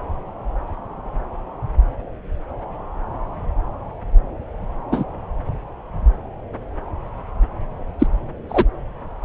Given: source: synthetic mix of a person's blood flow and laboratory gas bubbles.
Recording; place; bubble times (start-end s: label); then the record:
Doppler ultrasound of blood flow; subclavian vein
4.91-5.04 s: bubbles
7.99-8.06 s: bubbles
8.48-8.65 s: bubbles
From the record:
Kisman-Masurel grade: 123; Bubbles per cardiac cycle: 1 to 2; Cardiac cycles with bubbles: 10 to 50%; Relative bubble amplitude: loud (0.450 to 0.775); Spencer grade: 2 (many but less than half of the cardiac periods contain bubble signals, singularly or in groups); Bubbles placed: anywhere in the cardiac cycle